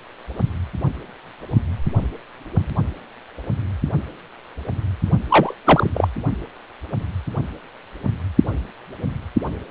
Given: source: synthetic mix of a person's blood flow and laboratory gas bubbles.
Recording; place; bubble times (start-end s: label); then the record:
Doppler ultrasound of blood flow; precordium
5.29-5.54 s: bubbles
5.65-5.90 s: bubbles
5.94-6.08 s: bubbles
From the record:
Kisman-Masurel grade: 213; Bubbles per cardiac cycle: several, 3 to 8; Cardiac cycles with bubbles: 1 to 10%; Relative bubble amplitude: loud (0.450 to 0.775); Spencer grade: 1 (occasional bubble signal discernible with the cardiac motion signal, with majority of cardiac periods free of bubbles); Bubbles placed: only in the low amplitude regions of the cardiac cycle